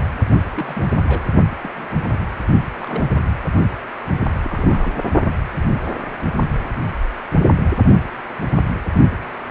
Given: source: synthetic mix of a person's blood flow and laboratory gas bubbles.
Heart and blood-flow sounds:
Doppler ultrasound of blood flow; precordium
0.53-0.85 s: bubbles
1.04-1.24 s: bubbles
1.61-1.89 s: bubbles
1.94-2.19 s: bubbles
2.78-3.06 s: bubbles
4.44-4.94 s: bubbles
From the record:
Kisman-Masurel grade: 121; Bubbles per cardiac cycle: 1 to 2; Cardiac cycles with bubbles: 10 to 50%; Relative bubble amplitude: barely perceptible (0.100 to 0.250); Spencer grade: 2 (many but less than half of the cardiac periods contain bubble signals, singularly or in groups); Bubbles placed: only in the low amplitude regions of the cardiac cycle

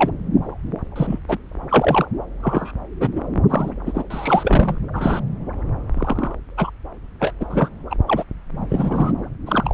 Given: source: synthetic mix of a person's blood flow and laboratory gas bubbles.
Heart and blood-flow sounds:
Doppler ultrasound of blood flow; subclavian vein
0.00-0.11 s: bubbles
0.96-1.18 s: bubbles
1.28-1.38 s: bubbles
1.69-2.06 s: bubbles
2.42-2.72 s: bubbles
3.00-3.08 s: bubbles
3.15-3.21 s: bubbles
3.50-3.71 s: bubbles
3.86-4.03 s: bubbles
4.10-4.78 s: bubbles
4.93-5.20 s: bubbles
5.96-6.36 s: bubbles
6.57-6.70 s: bubbles
7.20-7.33 s: bubbles
7.40-7.45 s: bubbles
7.49-7.69 s: bubbles
7.90-7.96 s: bubbles
8.07-8.23 s: bubbles
8.70-9.12 s: bubbles
9.46-9.74 s: bubbles
From the record:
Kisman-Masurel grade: 242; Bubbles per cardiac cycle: several, 3 to 8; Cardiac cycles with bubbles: 100%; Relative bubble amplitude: moderate (0.250 to 0.450); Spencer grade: 3 (all of the cardiac periods contain showers or single bubble signals, but not dominating or overriding the cardiac motion signals); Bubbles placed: anywhere in the cardiac cycle

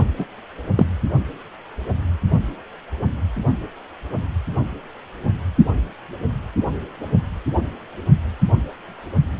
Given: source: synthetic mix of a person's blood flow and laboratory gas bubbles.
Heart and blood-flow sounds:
Doppler ultrasound of blood flow; precordium
0.00-0.04 s: bubbles
0.18-0.25 s: bubbles
0.76-0.86 s: bubbles
From the record:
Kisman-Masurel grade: 223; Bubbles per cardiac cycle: several, 3 to 8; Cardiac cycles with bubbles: 10 to 50%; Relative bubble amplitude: loud (0.450 to 0.775); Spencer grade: 2 (many but less than half of the cardiac periods contain bubble signals, singularly or in groups); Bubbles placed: only in the low amplitude regions of the cardiac cycle

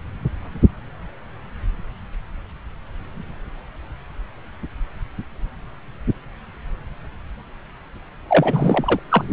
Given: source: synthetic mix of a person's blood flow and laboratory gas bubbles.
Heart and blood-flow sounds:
Doppler ultrasound of blood flow; subclavian vein
8.29-8.99 s: bubbles
9.09-9.24 s: bubbles
From the record:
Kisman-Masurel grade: 213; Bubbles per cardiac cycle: several, 3 to 8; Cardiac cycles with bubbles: 1 to 10%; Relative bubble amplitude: loud (0.450 to 0.775); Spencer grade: 1 (occasional bubble signal discernible with the cardiac motion signal, with majority of cardiac periods free of bubbles); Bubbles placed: anywhere in the cardiac cycle

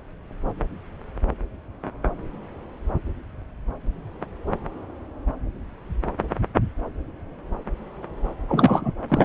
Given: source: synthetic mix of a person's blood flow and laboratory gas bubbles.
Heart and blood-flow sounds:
Doppler ultrasound of blood flow; subclavian vein
8.48-8.93 s: bubbles
9.08-9.25 s: bubbles
From the record:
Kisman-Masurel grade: 223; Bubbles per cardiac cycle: several, 3 to 8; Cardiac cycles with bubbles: 10 to 50%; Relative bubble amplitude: loud (0.450 to 0.775); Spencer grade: 2 (many but less than half of the cardiac periods contain bubble signals, singularly or in groups); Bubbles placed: anywhere in the cardiac cycle

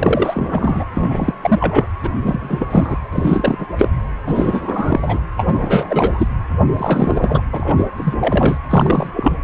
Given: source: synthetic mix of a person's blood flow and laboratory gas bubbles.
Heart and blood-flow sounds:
Doppler ultrasound of blood flow; precordium
0.00-0.84 s: bubbles
0.96-1.34 s: bubbles
1.42-1.87 s: bubbles
2.03-2.10 s: bubbles
2.23-2.98 s: bubbles
3.10-3.67 s: bubbles
3.77-3.88 s: bubbles
4.25-5.21 s: bubbles
5.36-6.28 s: bubbles
6.76-7.42 s: bubbles
7.52-7.88 s: bubbles
7.96-8.14 s: bubbles
8.21-8.59 s: bubbles
8.69-9.10 s: bubbles
9.13-9.32 s: bubbles
From the record:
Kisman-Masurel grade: 343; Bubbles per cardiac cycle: rolling drumbeat, 9 or more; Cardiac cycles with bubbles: 100%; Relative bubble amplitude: loud (0.450 to 0.775); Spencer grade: 3 (all of the cardiac periods contain showers or single bubble signals, but not dominating or overriding the cardiac motion signals); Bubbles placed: anywhere in the cardiac cycle

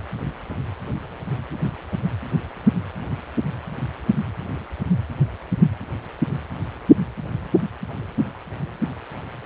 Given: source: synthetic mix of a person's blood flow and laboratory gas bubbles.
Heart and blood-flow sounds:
Doppler ultrasound of blood flow; precordium
no bubbles
From the record:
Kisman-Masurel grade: 000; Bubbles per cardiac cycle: 0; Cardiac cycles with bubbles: 0%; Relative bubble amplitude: no bubbles discernible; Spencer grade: 0 (complete lack of bubble signals)

